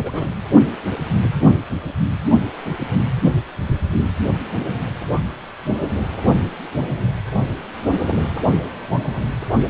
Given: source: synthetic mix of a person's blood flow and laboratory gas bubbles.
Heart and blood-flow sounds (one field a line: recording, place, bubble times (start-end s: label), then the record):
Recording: Doppler ultrasound of blood flow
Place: precordium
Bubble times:
0.00-0.29 s: bubbles
From the record:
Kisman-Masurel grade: 221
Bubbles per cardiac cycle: several, 3 to 8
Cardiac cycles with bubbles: 10 to 50%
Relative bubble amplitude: barely perceptible (0.100 to 0.250)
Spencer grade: 2 (many but less than half of the cardiac periods contain bubble signals, singularly or in groups)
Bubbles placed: anywhere in the cardiac cycle